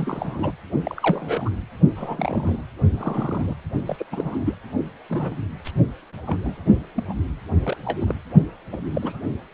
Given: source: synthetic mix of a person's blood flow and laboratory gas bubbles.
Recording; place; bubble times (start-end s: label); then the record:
Doppler ultrasound of blood flow; precordium
0.00-0.52 s: bubbles
0.83-1.49 s: bubbles
1.95-2.62 s: bubbles
2.95-3.55 s: bubbles
3.86-4.05 s: bubbles
4.12-4.54 s: bubbles
5.09-5.37 s: bubbles
5.64-5.71 s: bubbles
6.17-6.62 s: bubbles
6.96-7.03 s: bubbles
7.08-7.14 s: bubbles
7.64-7.77 s: bubbles
7.84-8.14 s: bubbles
8.72-8.78 s: bubbles
8.93-9.19 s: bubbles
9.52-9.54 s: bubbles
From the record:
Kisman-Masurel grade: 242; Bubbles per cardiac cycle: several, 3 to 8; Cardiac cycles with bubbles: 100%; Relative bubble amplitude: moderate (0.250 to 0.450); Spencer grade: 3 (all of the cardiac periods contain showers or single bubble signals, but not dominating or overriding the cardiac motion signals); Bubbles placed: only in the low amplitude regions of the cardiac cycle